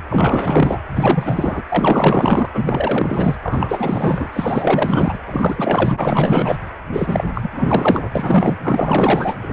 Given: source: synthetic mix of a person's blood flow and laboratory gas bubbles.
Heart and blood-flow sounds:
Doppler ultrasound of blood flow; precordium
0.09-0.80 s: bubbles
0.89-1.63 s: bubbles
1.69-2.49 s: bubbles
2.53-3.35 s: bubbles
3.43-5.18 s: bubbles
5.26-5.94 s: bubbles
5.96-6.56 s: bubbles
6.92-7.24 s: bubbles
7.35-7.50 s: bubbles
7.53-8.10 s: bubbles
8.15-8.56 s: bubbles
8.63-9.35 s: bubbles
9.41-9.53 s: bubbles
From the record:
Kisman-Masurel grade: 444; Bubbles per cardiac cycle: continuous sound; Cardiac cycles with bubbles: 100%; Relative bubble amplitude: maximal (0.775 to 0.999); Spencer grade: 4 (maximum detectable bubble signal sounding continuously throughout systole and diastole of every cardiac period, and overriding the amplitude of the normal cardiac signals); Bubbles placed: anywhere in the cardiac cycle

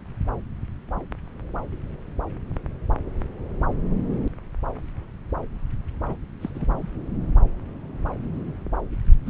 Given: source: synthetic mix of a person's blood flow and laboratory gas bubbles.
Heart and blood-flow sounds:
Doppler ultrasound of blood flow; subclavian vein
6.08-6.17 s: bubbles
6.41-6.50 s: bubbles
6.54-6.89 s: bubbles
9.26-9.30 s: bubbles
From the record:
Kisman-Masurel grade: 221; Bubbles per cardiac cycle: several, 3 to 8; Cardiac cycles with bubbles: 10 to 50%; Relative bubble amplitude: barely perceptible (0.100 to 0.250); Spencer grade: 2 (many but less than half of the cardiac periods contain bubble signals, singularly or in groups); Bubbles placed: anywhere in the cardiac cycle

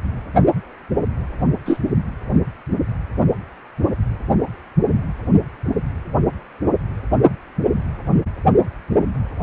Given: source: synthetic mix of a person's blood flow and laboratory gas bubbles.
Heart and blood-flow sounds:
Doppler ultrasound of blood flow; precordium
1.65-1.77 s: bubbles
From the record:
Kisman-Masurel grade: 113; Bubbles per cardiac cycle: 1 to 2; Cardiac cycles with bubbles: 1 to 10%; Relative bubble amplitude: loud (0.450 to 0.775); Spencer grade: 1 (occasional bubble signal discernible with the cardiac motion signal, with majority of cardiac periods free of bubbles); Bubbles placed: only in the low amplitude regions of the cardiac cycle

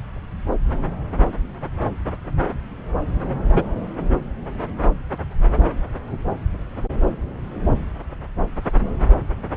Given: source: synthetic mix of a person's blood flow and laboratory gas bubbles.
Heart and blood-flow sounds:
Doppler ultrasound of blood flow; subclavian vein
3.54-3.65 s: bubbles
From the record:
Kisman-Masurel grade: 113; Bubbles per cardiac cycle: 1 to 2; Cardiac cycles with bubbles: 1 to 10%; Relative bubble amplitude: loud (0.450 to 0.775); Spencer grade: 1 (occasional bubble signal discernible with the cardiac motion signal, with majority of cardiac periods free of bubbles); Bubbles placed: anywhere in the cardiac cycle

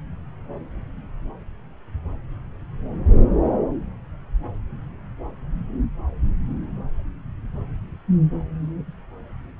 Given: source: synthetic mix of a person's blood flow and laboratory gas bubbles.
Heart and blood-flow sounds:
Doppler ultrasound of blood flow; subclavian vein
no bubbles
From the record:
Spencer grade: 0 (complete lack of bubble signals)

